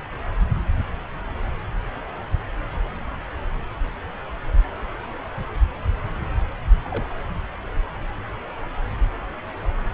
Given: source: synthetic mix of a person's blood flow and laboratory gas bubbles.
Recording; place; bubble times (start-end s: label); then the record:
Doppler ultrasound of blood flow; subclavian vein
6.85-7.08 s: bubbles
From the record:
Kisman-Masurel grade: 111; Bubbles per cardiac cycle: 1 to 2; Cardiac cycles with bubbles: 1 to 10%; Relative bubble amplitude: barely perceptible (0.100 to 0.250); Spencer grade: 1 (occasional bubble signal discernible with the cardiac motion signal, with majority of cardiac periods free of bubbles); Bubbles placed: anywhere in the cardiac cycle